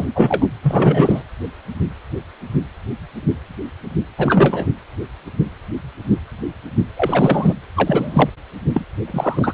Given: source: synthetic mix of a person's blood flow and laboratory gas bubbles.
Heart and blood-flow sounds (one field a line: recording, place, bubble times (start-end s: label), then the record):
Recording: Doppler ultrasound of blood flow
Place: precordium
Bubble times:
0.00-0.06 s: bubbles
0.15-0.47 s: bubbles
0.62-1.23 s: bubbles
4.18-4.67 s: bubbles
6.96-7.54 s: bubbles
7.76-8.29 s: bubbles
8.74-8.85 s: bubbles
9.07-9.54 s: bubbles
From the record:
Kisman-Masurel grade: 223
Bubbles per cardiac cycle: several, 3 to 8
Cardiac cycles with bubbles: 10 to 50%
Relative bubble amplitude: loud (0.450 to 0.775)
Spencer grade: 2 (many but less than half of the cardiac periods contain bubble signals, singularly or in groups)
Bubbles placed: anywhere in the cardiac cycle